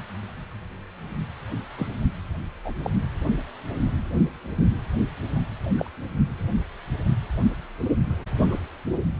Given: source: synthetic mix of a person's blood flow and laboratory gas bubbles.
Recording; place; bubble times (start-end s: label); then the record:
Doppler ultrasound of blood flow; precordium
1.76-1.87 s: bubbles
2.65-2.74 s: bubbles
2.83-2.92 s: bubbles
5.78-5.91 s: bubbles
8.51-8.57 s: bubbles
From the record:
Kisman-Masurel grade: 121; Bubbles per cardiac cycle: 1 to 2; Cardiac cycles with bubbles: 10 to 50%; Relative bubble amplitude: barely perceptible (0.100 to 0.250); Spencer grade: 2 (many but less than half of the cardiac periods contain bubble signals, singularly or in groups); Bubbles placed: only in the low amplitude regions of the cardiac cycle